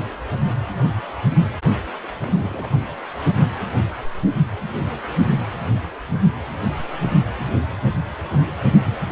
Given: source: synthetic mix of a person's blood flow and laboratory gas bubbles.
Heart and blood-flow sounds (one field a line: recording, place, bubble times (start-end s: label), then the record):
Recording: Doppler ultrasound of blood flow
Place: precordium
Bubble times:
0.00-0.06 s: bubbles
0.11-0.14 s: bubbles
0.48-0.71 s: bubbles
2.21-2.81 s: bubbles
From the record:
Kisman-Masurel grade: 221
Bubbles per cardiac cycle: several, 3 to 8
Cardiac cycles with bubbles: 10 to 50%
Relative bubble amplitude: barely perceptible (0.100 to 0.250)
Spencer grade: 2 (many but less than half of the cardiac periods contain bubble signals, singularly or in groups)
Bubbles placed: anywhere in the cardiac cycle